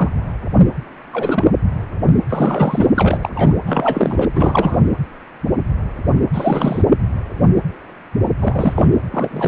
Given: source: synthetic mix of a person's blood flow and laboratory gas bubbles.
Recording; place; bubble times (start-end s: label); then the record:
Doppler ultrasound of blood flow; precordium
0.00-0.10 s: bubbles
1.12-1.52 s: bubbles
2.29-2.89 s: bubbles
2.94-3.56 s: bubbles
3.65-4.29 s: bubbles
4.35-4.81 s: bubbles
6.33-6.82 s: bubbles
8.40-8.95 s: bubbles
9.11-9.48 s: bubbles
From the record:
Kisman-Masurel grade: 333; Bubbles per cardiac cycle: rolling drumbeat, 9 or more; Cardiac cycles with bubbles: 50 to 99%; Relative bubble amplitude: loud (0.450 to 0.775); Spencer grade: 3 (all of the cardiac periods contain showers or single bubble signals, but not dominating or overriding the cardiac motion signals); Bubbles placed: anywhere in the cardiac cycle